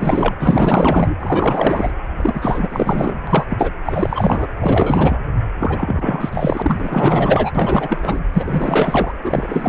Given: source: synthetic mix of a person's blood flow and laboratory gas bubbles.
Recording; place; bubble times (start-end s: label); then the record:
Doppler ultrasound of blood flow; precordium
0.00-0.34 s: bubbles
0.40-1.16 s: bubbles
1.20-1.91 s: bubbles
2.17-3.17 s: bubbles
3.27-3.46 s: bubbles
3.50-3.73 s: bubbles
3.85-4.47 s: bubbles
4.59-5.21 s: bubbles
5.59-7.51 s: bubbles
7.54-8.21 s: bubbles
8.33-9.12 s: bubbles
9.24-9.69 s: bubbles
From the record:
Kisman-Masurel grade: 444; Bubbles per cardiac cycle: continuous sound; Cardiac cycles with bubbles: 100%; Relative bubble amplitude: maximal (0.775 to 0.999); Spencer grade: 4 (maximum detectable bubble signal sounding continuously throughout systole and diastole of every cardiac period, and overriding the amplitude of the normal cardiac signals); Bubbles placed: anywhere in the cardiac cycle